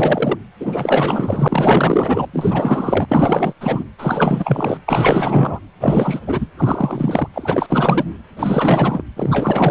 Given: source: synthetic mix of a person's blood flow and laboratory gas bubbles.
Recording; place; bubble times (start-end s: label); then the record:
Doppler ultrasound of blood flow; precordium
0.00-0.37 s: bubbles
0.60-2.28 s: bubbles
2.33-3.54 s: bubbles
3.60-3.84 s: bubbles
3.98-4.79 s: bubbles
4.88-5.59 s: bubbles
5.80-6.20 s: bubbles
6.26-6.46 s: bubbles
6.57-7.28 s: bubbles
7.34-8.14 s: bubbles
8.36-9.03 s: bubbles
9.16-9.71 s: bubbles
From the record:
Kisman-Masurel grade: 444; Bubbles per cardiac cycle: continuous sound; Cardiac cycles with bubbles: 100%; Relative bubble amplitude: maximal (0.775 to 0.999); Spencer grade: 4 (maximum detectable bubble signal sounding continuously throughout systole and diastole of every cardiac period, and overriding the amplitude of the normal cardiac signals); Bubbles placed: anywhere in the cardiac cycle